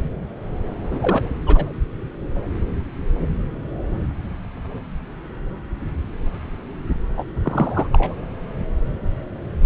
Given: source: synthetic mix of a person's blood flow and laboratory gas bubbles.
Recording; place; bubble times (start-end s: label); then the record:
Doppler ultrasound of blood flow; subclavian vein
0.91-1.29 s: bubbles
1.45-1.72 s: bubbles
7.17-7.24 s: bubbles
7.42-7.87 s: bubbles
7.93-8.14 s: bubbles
From the record:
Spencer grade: 2 (many but less than half of the cardiac periods contain bubble signals, singularly or in groups); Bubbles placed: anywhere in the cardiac cycle